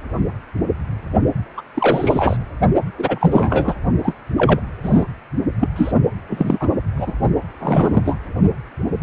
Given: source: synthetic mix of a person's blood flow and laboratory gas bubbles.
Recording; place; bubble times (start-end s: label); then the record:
Doppler ultrasound of blood flow; precordium
1.57-1.61 s: bubbles
1.74-2.37 s: bubbles
2.98-3.74 s: bubbles
4.03-4.15 s: bubbles
4.38-4.61 s: bubbles
4.83-5.05 s: bubbles
5.61-5.68 s: bubbles
5.76-5.92 s: bubbles
6.27-6.69 s: bubbles
6.96-7.12 s: bubbles
7.59-8.02 s: bubbles
8.05-8.17 s: bubbles
From the record:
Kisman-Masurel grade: 233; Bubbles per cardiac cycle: several, 3 to 8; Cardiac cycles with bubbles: 50 to 99%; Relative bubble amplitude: loud (0.450 to 0.775); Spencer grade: 3 (all of the cardiac periods contain showers or single bubble signals, but not dominating or overriding the cardiac motion signals); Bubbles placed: only in the low amplitude regions of the cardiac cycle